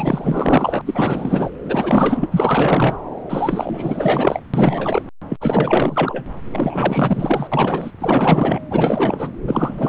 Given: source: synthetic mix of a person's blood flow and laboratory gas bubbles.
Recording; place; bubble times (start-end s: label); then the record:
Doppler ultrasound of blood flow; subclavian vein
0.00-0.81 s: bubbles
0.85-1.50 s: bubbles
1.63-2.27 s: bubbles
2.32-2.97 s: bubbles
3.29-4.40 s: bubbles
4.54-5.02 s: bubbles
5.29-5.37 s: bubbles
5.40-6.24 s: bubbles
6.51-7.47 s: bubbles
7.51-7.91 s: bubbles
8.00-8.61 s: bubbles
8.70-9.34 s: bubbles
9.47-9.89 s: bubbles
From the record:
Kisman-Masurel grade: 444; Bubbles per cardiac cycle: continuous sound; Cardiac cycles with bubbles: 100%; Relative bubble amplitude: maximal (0.775 to 0.999); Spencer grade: 4 (maximum detectable bubble signal sounding continuously throughout systole and diastole of every cardiac period, and overriding the amplitude of the normal cardiac signals); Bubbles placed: anywhere in the cardiac cycle